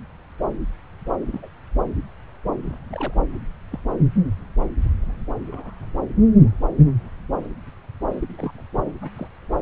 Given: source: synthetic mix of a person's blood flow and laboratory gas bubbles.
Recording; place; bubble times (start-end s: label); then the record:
Doppler ultrasound of blood flow; subclavian vein
1.21-1.48 s: bubbles
2.63-2.77 s: bubbles
2.90-3.14 s: bubbles
3.32-3.37 s: bubbles
3.71-3.79 s: bubbles
4.88-5.21 s: bubbles
5.51-5.74 s: bubbles
8.20-8.65 s: bubbles
9.02-9.10 s: bubbles
9.16-9.28 s: bubbles
From the record:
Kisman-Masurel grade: 121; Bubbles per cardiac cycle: 1 to 2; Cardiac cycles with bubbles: 10 to 50%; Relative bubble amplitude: barely perceptible (0.100 to 0.250); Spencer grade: 2 (many but less than half of the cardiac periods contain bubble signals, singularly or in groups); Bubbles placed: anywhere in the cardiac cycle